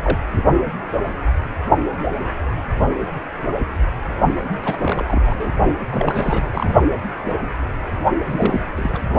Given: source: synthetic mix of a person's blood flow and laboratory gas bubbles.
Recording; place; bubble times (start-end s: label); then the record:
Doppler ultrasound of blood flow; precordium
0.03-0.18 s: bubbles
0.36-0.45 s: bubbles
4.57-5.22 s: bubbles
5.25-5.57 s: bubbles
5.90-6.74 s: bubbles
8.26-8.65 s: bubbles
8.76-9.02 s: bubbles
From the record:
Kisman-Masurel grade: 332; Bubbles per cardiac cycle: rolling drumbeat, 9 or more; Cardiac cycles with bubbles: 50 to 99%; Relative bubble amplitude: moderate (0.250 to 0.450); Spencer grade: 3 (all of the cardiac periods contain showers or single bubble signals, but not dominating or overriding the cardiac motion signals); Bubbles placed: only in the low amplitude regions of the cardiac cycle